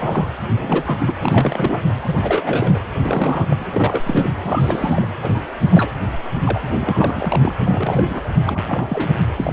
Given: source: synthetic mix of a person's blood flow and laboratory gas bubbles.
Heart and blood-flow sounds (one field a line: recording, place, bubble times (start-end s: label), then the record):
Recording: Doppler ultrasound of blood flow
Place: precordium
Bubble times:
0.00-0.27 s: bubbles
0.54-1.12 s: bubbles
1.21-1.81 s: bubbles
2.06-2.79 s: bubbles
2.95-3.46 s: bubbles
3.49-3.56 s: bubbles
3.60-3.65 s: bubbles
3.72-4.27 s: bubbles
4.43-5.07 s: bubbles
5.22-5.46 s: bubbles
5.59-5.92 s: bubbles
6.44-6.61 s: bubbles
6.79-7.55 s: bubbles
7.62-8.29 s: bubbles
8.46-9.12 s: bubbles
9.37-9.53 s: bubbles
From the record:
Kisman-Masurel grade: 342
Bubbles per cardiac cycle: rolling drumbeat, 9 or more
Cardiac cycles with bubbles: 100%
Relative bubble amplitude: moderate (0.250 to 0.450)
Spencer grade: 3 (all of the cardiac periods contain showers or single bubble signals, but not dominating or overriding the cardiac motion signals)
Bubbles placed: anywhere in the cardiac cycle